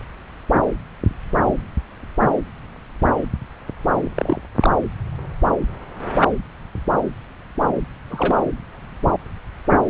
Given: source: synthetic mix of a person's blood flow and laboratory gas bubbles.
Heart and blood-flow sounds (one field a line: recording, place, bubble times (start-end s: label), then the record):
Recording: Doppler ultrasound of blood flow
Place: subclavian vein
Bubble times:
4.15-4.39 s: bubbles
4.59-4.70 s: bubbles
8.10-8.44 s: bubbles
From the record:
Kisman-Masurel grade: 122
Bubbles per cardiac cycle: 1 to 2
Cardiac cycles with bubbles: 10 to 50%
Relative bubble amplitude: moderate (0.250 to 0.450)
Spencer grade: 2 (many but less than half of the cardiac periods contain bubble signals, singularly or in groups)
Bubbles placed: anywhere in the cardiac cycle